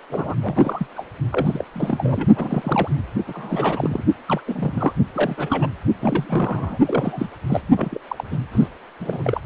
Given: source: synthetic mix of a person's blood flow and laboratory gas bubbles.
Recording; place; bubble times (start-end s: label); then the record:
Doppler ultrasound of blood flow; precordium
0.09-0.34 s: bubbles
0.42-0.87 s: bubbles
0.95-1.06 s: bubbles
1.31-1.65 s: bubbles
1.73-2.29 s: bubbles
2.36-2.89 s: bubbles
3.27-4.04 s: bubbles
4.26-4.41 s: bubbles
4.47-4.93 s: bubbles
5.15-5.68 s: bubbles
6.01-6.78 s: bubbles
6.86-7.28 s: bubbles
7.49-7.62 s: bubbles
7.76-7.99 s: bubbles
8.08-8.24 s: bubbles
8.30-8.38 s: bubbles
8.51-8.67 s: bubbles
9.00-9.40 s: bubbles
From the record:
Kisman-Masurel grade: 342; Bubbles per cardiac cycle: rolling drumbeat, 9 or more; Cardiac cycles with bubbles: 100%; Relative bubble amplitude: moderate (0.250 to 0.450); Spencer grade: 3 (all of the cardiac periods contain showers or single bubble signals, but not dominating or overriding the cardiac motion signals); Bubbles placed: only in the low amplitude regions of the cardiac cycle